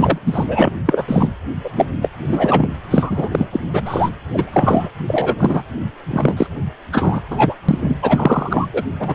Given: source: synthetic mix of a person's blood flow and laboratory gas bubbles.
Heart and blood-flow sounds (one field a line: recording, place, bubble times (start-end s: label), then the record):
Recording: Doppler ultrasound of blood flow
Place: precordium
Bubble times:
0.00-0.18 s: bubbles
0.26-0.45 s: bubbles
0.47-0.71 s: bubbles
0.86-1.03 s: bubbles
1.08-1.29 s: bubbles
1.64-1.70 s: bubbles
1.76-1.85 s: bubbles
2.02-2.09 s: bubbles
2.27-2.67 s: bubbles
2.90-3.28 s: bubbles
3.32-3.46 s: bubbles
3.52-3.60 s: bubbles
3.66-3.83 s: bubbles
3.85-4.10 s: bubbles
4.33-4.88 s: bubbles
5.07-5.62 s: bubbles
6.08-6.46 s: bubbles
6.92-7.21 s: bubbles
7.30-7.54 s: bubbles
7.69-7.79 s: bubbles
7.82-7.96 s: bubbles
8.02-8.66 s: bubbles
8.72-8.84 s: bubbles
8.99-9.14 s: bubbles
From the record:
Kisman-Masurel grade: 343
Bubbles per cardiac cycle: rolling drumbeat, 9 or more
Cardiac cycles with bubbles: 100%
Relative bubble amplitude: loud (0.450 to 0.775)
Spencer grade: 3 (all of the cardiac periods contain showers or single bubble signals, but not dominating or overriding the cardiac motion signals)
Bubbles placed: anywhere in the cardiac cycle